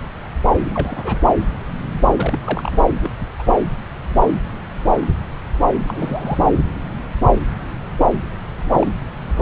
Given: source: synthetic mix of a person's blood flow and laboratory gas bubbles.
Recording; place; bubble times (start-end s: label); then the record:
Doppler ultrasound of blood flow; subclavian vein
0.60-1.19 s: bubbles
2.15-2.38 s: bubbles
2.44-2.77 s: bubbles
3.02-3.10 s: bubbles
3.38-3.43 s: bubbles
3.47-3.58 s: bubbles
5.83-6.39 s: bubbles
8.65-8.87 s: bubbles
9.36-9.42 s: bubbles
From the record:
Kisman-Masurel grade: 221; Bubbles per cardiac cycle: several, 3 to 8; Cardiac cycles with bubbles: 10 to 50%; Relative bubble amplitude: barely perceptible (0.100 to 0.250); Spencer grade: 2 (many but less than half of the cardiac periods contain bubble signals, singularly or in groups); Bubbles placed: anywhere in the cardiac cycle